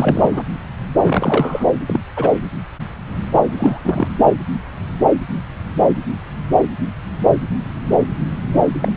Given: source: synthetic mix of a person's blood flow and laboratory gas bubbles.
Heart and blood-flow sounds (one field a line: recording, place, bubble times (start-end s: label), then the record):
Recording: Doppler ultrasound of blood flow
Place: subclavian vein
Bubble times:
0.00-0.30 s: bubbles
0.32-0.44 s: bubbles
1.04-1.64 s: bubbles
1.88-1.99 s: bubbles
2.16-2.31 s: bubbles
3.33-3.42 s: bubbles
3.45-4.08 s: bubbles
4.25-4.32 s: bubbles
8.53-8.60 s: bubbles
8.79-8.92 s: bubbles
From the record:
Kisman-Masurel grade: 222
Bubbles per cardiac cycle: several, 3 to 8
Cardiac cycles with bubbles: 10 to 50%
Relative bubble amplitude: moderate (0.250 to 0.450)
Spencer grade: 2 (many but less than half of the cardiac periods contain bubble signals, singularly or in groups)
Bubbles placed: anywhere in the cardiac cycle